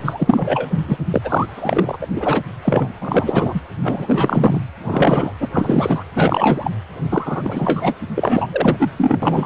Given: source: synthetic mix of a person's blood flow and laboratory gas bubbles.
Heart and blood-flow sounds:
Doppler ultrasound of blood flow; precordium
0.04-0.69 s: bubbles
0.88-0.97 s: bubbles
1.14-1.97 s: bubbles
2.01-2.07 s: bubbles
2.15-2.43 s: bubbles
2.64-2.88 s: bubbles
3.01-3.60 s: bubbles
3.83-4.65 s: bubbles
4.83-5.33 s: bubbles
5.40-5.49 s: bubbles
5.53-6.04 s: bubbles
6.15-6.71 s: bubbles
7.09-7.94 s: bubbles
8.15-8.47 s: bubbles
8.52-8.77 s: bubbles
8.79-8.89 s: bubbles
8.97-9.19 s: bubbles
9.22-9.46 s: bubbles
From the record:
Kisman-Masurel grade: 343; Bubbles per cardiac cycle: rolling drumbeat, 9 or more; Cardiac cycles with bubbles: 100%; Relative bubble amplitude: loud (0.450 to 0.775); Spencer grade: 3 (all of the cardiac periods contain showers or single bubble signals, but not dominating or overriding the cardiac motion signals); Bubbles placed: anywhere in the cardiac cycle

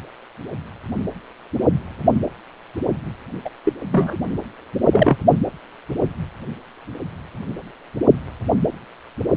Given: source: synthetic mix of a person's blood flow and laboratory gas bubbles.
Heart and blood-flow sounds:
Doppler ultrasound of blood flow; precordium
3.44-3.50 s: bubbles
3.65-3.73 s: bubbles
3.92-4.17 s: bubbles
4.92-5.17 s: bubbles
From the record:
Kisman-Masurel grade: 213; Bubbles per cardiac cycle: several, 3 to 8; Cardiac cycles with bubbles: 1 to 10%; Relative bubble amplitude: loud (0.450 to 0.775); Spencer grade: 1 (occasional bubble signal discernible with the cardiac motion signal, with majority of cardiac periods free of bubbles); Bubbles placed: only in the low amplitude regions of the cardiac cycle

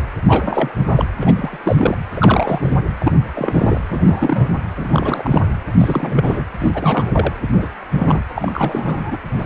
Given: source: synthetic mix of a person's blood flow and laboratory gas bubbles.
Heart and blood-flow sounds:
Doppler ultrasound of blood flow; precordium
0.27-0.72 s: bubbles
0.87-1.05 s: bubbles
1.21-1.58 s: bubbles
1.64-1.98 s: bubbles
2.15-2.81 s: bubbles
3.00-3.12 s: bubbles
3.33-3.81 s: bubbles
3.90-4.59 s: bubbles
4.75-5.42 s: bubbles
5.78-6.45 s: bubbles
6.59-7.33 s: bubbles
7.53-7.67 s: bubbles
7.91-8.22 s: bubbles
8.36-9.18 s: bubbles
9.25-9.46 s: bubbles
From the record:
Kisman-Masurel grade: 342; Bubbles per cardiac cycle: rolling drumbeat, 9 or more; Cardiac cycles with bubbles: 100%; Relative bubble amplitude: moderate (0.250 to 0.450); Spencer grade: 3 (all of the cardiac periods contain showers or single bubble signals, but not dominating or overriding the cardiac motion signals); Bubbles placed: anywhere in the cardiac cycle

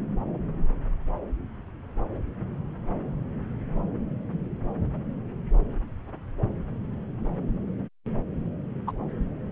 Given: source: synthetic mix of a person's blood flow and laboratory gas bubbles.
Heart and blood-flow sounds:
Doppler ultrasound of blood flow; subclavian vein
8.87-8.92 s: bubbles
From the record:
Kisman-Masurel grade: 112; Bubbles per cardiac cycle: 1 to 2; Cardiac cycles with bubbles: 1 to 10%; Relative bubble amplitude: moderate (0.250 to 0.450); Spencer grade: 1 (occasional bubble signal discernible with the cardiac motion signal, with majority of cardiac periods free of bubbles); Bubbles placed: anywhere in the cardiac cycle

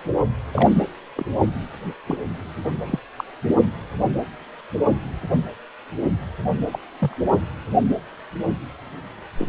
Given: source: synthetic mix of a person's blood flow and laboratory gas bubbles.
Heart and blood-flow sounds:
Doppler ultrasound of blood flow; precordium
0.52-0.70 s: bubbles
1.16-1.30 s: bubbles
2.06-2.17 s: bubbles
2.86-2.99 s: bubbles
3.17-3.24 s: bubbles
6.72-6.79 s: bubbles
7.00-7.14 s: bubbles
9.39-9.46 s: bubbles
From the record:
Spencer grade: 2 (many but less than half of the cardiac periods contain bubble signals, singularly or in groups); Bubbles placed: anywhere in the cardiac cycle

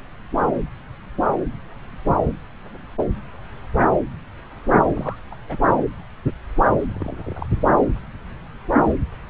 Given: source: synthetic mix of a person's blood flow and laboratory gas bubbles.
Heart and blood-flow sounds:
Doppler ultrasound of blood flow; subclavian vein
4.81-4.92 s: bubbles
4.95-5.16 s: bubbles
5.31-5.35 s: bubbles
5.47-5.57 s: bubbles
6.89-7.46 s: bubbles
From the record:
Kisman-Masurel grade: 221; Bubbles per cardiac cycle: several, 3 to 8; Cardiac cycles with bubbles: 10 to 50%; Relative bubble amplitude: barely perceptible (0.100 to 0.250); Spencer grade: 2 (many but less than half of the cardiac periods contain bubble signals, singularly or in groups); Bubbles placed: anywhere in the cardiac cycle

